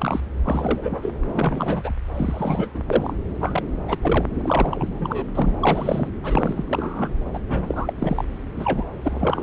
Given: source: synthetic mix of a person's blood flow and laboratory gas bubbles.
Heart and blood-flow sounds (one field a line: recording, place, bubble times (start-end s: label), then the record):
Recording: Doppler ultrasound of blood flow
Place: subclavian vein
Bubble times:
0.00-0.20 s: bubbles
0.43-1.12 s: bubbles
1.25-1.92 s: bubbles
2.15-2.82 s: bubbles
2.88-3.17 s: bubbles
3.40-3.63 s: bubbles
3.88-3.98 s: bubbles
4.02-4.26 s: bubbles
4.29-5.26 s: bubbles
5.35-5.57 s: bubbles
5.60-6.08 s: bubbles
6.23-6.64 s: bubbles
6.68-7.08 s: bubbles
7.33-7.39 s: bubbles
7.48-7.93 s: bubbles
7.99-8.25 s: bubbles
8.55-8.84 s: bubbles
9.00-9.43 s: bubbles
From the record:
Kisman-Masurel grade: 343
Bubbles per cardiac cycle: rolling drumbeat, 9 or more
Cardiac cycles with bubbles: 100%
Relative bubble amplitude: loud (0.450 to 0.775)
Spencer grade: 3 (all of the cardiac periods contain showers or single bubble signals, but not dominating or overriding the cardiac motion signals)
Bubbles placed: anywhere in the cardiac cycle